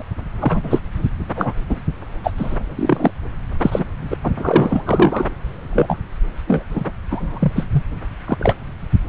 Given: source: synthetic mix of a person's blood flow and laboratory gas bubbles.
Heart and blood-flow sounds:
Doppler ultrasound of blood flow; subclavian vein
0.00-0.02 s: bubbles
0.40-0.79 s: bubbles
1.18-1.54 s: bubbles
1.69-1.80 s: bubbles
2.23-2.33 s: bubbles
2.36-2.57 s: bubbles
2.75-3.11 s: bubbles
3.61-3.83 s: bubbles
4.10-4.17 s: bubbles
4.23-4.32 s: bubbles
4.36-5.27 s: bubbles
5.73-6.00 s: bubbles
6.47-6.62 s: bubbles
6.69-6.91 s: bubbles
7.11-7.52 s: bubbles
7.55-7.66 s: bubbles
7.71-7.83 s: bubbles
8.27-8.54 s: bubbles
From the record:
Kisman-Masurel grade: 243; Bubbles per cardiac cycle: several, 3 to 8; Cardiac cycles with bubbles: 100%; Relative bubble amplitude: loud (0.450 to 0.775); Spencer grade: 3 (all of the cardiac periods contain showers or single bubble signals, but not dominating or overriding the cardiac motion signals); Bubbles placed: anywhere in the cardiac cycle

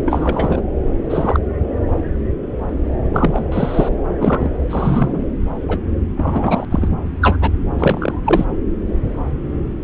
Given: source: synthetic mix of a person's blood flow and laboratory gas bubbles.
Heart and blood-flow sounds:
Doppler ultrasound of blood flow; subclavian vein
0.06-0.61 s: bubbles
1.09-1.40 s: bubbles
3.13-3.45 s: bubbles
3.52-3.89 s: bubbles
4.19-4.48 s: bubbles
4.69-5.23 s: bubbles
5.68-5.78 s: bubbles
6.17-6.65 s: bubbles
6.71-6.88 s: bubbles
7.21-7.36 s: bubbles
7.40-7.50 s: bubbles
7.79-8.13 s: bubbles
8.25-8.45 s: bubbles
From the record:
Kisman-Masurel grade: 233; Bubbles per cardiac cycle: several, 3 to 8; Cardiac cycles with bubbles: 50 to 99%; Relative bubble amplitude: loud (0.450 to 0.775); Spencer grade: 3 (all of the cardiac periods contain showers or single bubble signals, but not dominating or overriding the cardiac motion signals); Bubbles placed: anywhere in the cardiac cycle

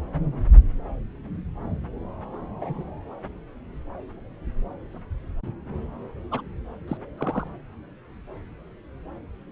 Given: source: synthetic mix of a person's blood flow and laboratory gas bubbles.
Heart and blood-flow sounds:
Doppler ultrasound of blood flow; subclavian vein
2.56-2.85 s: bubbles
6.31-6.42 s: bubbles
6.88-6.97 s: bubbles
7.17-7.48 s: bubbles
From the record:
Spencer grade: 2 (many but less than half of the cardiac periods contain bubble signals, singularly or in groups); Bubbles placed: anywhere in the cardiac cycle

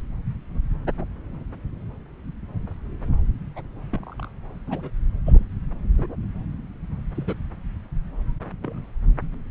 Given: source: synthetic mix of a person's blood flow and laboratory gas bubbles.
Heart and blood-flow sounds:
Doppler ultrasound of blood flow; subclavian vein
3.56-3.62 s: bubbles
3.93-4.15 s: bubbles
4.19-4.29 s: bubbles
4.67-4.91 s: bubbles
5.26-5.45 s: bubbles
5.94-6.07 s: bubbles
7.15-7.38 s: bubbles
8.62-8.82 s: bubbles
From the record:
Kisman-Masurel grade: 121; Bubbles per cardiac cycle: 1 to 2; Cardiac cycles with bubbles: 10 to 50%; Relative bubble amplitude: barely perceptible (0.100 to 0.250); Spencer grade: 2 (many but less than half of the cardiac periods contain bubble signals, singularly or in groups); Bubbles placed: anywhere in the cardiac cycle

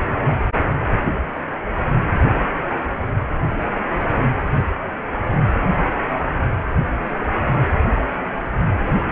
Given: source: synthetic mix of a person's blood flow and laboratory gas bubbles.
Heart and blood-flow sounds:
Doppler ultrasound of blood flow; precordium
no bubbles
From the record:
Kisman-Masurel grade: 000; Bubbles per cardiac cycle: 0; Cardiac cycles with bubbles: 0%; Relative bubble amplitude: no bubbles discernible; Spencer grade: 0 (complete lack of bubble signals)

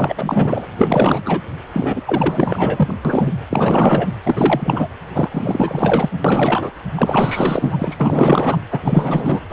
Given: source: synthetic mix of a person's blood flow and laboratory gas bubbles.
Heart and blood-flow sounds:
Doppler ultrasound of blood flow; precordium
0.00-0.66 s: bubbles
0.76-1.21 s: bubbles
1.25-1.41 s: bubbles
1.72-2.02 s: bubbles
2.06-2.95 s: bubbles
3.04-3.32 s: bubbles
3.50-4.09 s: bubbles
4.25-4.88 s: bubbles
5.13-6.09 s: bubbles
6.24-6.71 s: bubbles
6.96-7.96 s: bubbles
7.99-8.58 s: bubbles
8.71-9.40 s: bubbles
9.49-9.52 s: bubbles
From the record:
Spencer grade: 4 (maximum detectable bubble signal sounding continuously throughout systole and diastole of every cardiac period, and overriding the amplitude of the normal cardiac signals); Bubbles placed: anywhere in the cardiac cycle

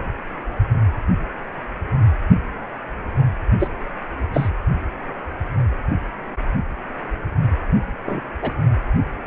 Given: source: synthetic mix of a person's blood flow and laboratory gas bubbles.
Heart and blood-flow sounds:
Doppler ultrasound of blood flow; precordium
3.59-3.68 s: bubbles
4.33-4.50 s: bubbles
8.05-8.23 s: bubbles
8.42-8.52 s: bubbles
From the record:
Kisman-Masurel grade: 122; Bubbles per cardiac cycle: 1 to 2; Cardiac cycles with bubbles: 10 to 50%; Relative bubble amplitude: moderate (0.250 to 0.450); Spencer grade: 2 (many but less than half of the cardiac periods contain bubble signals, singularly or in groups); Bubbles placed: only in the low amplitude regions of the cardiac cycle

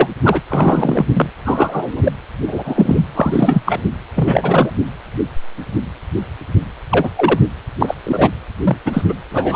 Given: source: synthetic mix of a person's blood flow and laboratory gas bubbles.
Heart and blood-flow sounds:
Doppler ultrasound of blood flow; precordium
0.00-0.09 s: bubbles
0.23-0.42 s: bubbles
0.49-1.06 s: bubbles
1.13-1.29 s: bubbles
1.44-2.12 s: bubbles
2.46-3.06 s: bubbles
3.14-3.63 s: bubbles
3.65-3.79 s: bubbles
4.15-4.71 s: bubbles
6.90-7.10 s: bubbles
7.16-7.39 s: bubbles
7.81-7.95 s: bubbles
8.03-8.29 s: bubbles
8.63-8.77 s: bubbles
8.85-9.01 s: bubbles
9.08-9.13 s: bubbles
9.30-9.55 s: bubbles
From the record:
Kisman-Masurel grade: 233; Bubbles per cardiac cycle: several, 3 to 8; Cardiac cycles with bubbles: 50 to 99%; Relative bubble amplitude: loud (0.450 to 0.775); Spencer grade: 3 (all of the cardiac periods contain showers or single bubble signals, but not dominating or overriding the cardiac motion signals); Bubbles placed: anywhere in the cardiac cycle

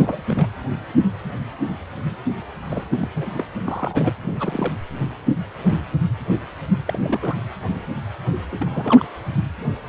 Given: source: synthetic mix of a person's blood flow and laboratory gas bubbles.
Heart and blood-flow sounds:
Doppler ultrasound of blood flow; precordium
0.00-0.22 s: bubbles
0.28-0.47 s: bubbles
2.70-2.84 s: bubbles
2.91-3.09 s: bubbles
3.15-3.47 s: bubbles
3.68-4.12 s: bubbles
4.22-4.74 s: bubbles
6.86-6.99 s: bubbles
7.03-7.37 s: bubbles
8.52-9.04 s: bubbles
From the record:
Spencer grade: 2 (many but less than half of the cardiac periods contain bubble signals, singularly or in groups); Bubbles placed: anywhere in the cardiac cycle

